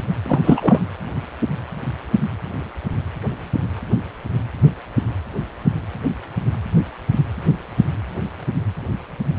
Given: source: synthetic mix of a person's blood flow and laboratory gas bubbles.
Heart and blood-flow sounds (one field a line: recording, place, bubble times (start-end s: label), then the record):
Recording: Doppler ultrasound of blood flow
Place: precordium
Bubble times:
0.22-0.40 s: bubbles
0.43-0.89 s: bubbles
From the record:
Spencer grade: 1 (occasional bubble signal discernible with the cardiac motion signal, with majority of cardiac periods free of bubbles)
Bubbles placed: anywhere in the cardiac cycle